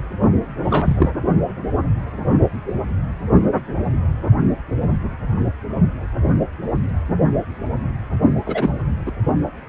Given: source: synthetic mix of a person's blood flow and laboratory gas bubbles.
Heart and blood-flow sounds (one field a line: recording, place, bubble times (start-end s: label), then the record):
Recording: Doppler ultrasound of blood flow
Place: precordium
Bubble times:
0.64-1.10 s: bubbles
8.46-8.70 s: bubbles
9.06-9.12 s: bubbles
From the record:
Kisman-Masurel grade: 222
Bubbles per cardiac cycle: several, 3 to 8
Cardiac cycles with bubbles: 10 to 50%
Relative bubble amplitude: moderate (0.250 to 0.450)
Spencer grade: 2 (many but less than half of the cardiac periods contain bubble signals, singularly or in groups)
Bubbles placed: only in the low amplitude regions of the cardiac cycle